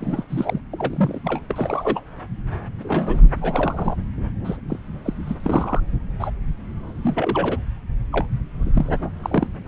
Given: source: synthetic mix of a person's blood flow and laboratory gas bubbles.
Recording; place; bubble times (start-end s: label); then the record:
Doppler ultrasound of blood flow; subclavian vein
0.01-0.24 s: bubbles
0.29-0.61 s: bubbles
0.72-1.19 s: bubbles
1.24-1.40 s: bubbles
1.49-2.00 s: bubbles
2.78-3.20 s: bubbles
3.41-3.96 s: bubbles
4.44-4.58 s: bubbles
4.68-4.79 s: bubbles
5.04-5.13 s: bubbles
5.26-5.34 s: bubbles
5.44-5.80 s: bubbles
6.20-6.31 s: bubbles
7.03-7.58 s: bubbles
8.12-8.26 s: bubbles
8.63-8.71 s: bubbles
8.73-8.94 s: bubbles
9.22-9.47 s: bubbles
9.65-9.68 s: bubbles
From the record:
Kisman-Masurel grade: 242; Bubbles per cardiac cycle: several, 3 to 8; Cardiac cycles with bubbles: 100%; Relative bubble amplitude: moderate (0.250 to 0.450); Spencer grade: 3 (all of the cardiac periods contain showers or single bubble signals, but not dominating or overriding the cardiac motion signals); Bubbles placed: anywhere in the cardiac cycle